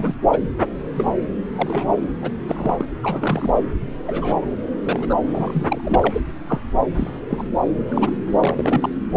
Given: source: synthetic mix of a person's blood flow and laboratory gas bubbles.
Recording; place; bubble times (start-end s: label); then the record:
Doppler ultrasound of blood flow; subclavian vein
0.00-0.15 s: bubbles
0.32-0.39 s: bubbles
0.60-0.66 s: bubbles
0.95-1.16 s: bubbles
1.56-2.06 s: bubbles
2.21-2.32 s: bubbles
2.46-2.85 s: bubbles
3.02-3.54 s: bubbles
4.07-4.46 s: bubbles
4.83-5.06 s: bubbles
5.09-5.15 s: bubbles
5.26-5.65 s: bubbles
5.69-6.21 s: bubbles
6.48-6.61 s: bubbles
6.96-7.20 s: bubbles
7.29-7.44 s: bubbles
7.87-8.15 s: bubbles
8.40-8.89 s: bubbles
From the record:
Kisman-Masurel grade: 242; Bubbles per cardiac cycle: several, 3 to 8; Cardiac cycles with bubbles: 100%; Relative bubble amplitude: moderate (0.250 to 0.450); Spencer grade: 3 (all of the cardiac periods contain showers or single bubble signals, but not dominating or overriding the cardiac motion signals); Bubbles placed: anywhere in the cardiac cycle